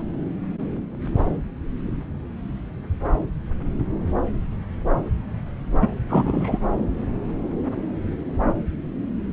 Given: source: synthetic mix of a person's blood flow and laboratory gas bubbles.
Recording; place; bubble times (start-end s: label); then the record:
Doppler ultrasound of blood flow; subclavian vein
5.81-5.88 s: bubbles
6.09-6.58 s: bubbles
From the record:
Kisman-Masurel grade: 123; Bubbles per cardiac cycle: 1 to 2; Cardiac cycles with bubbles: 10 to 50%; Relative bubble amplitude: loud (0.450 to 0.775); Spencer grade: 2 (many but less than half of the cardiac periods contain bubble signals, singularly or in groups); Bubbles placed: anywhere in the cardiac cycle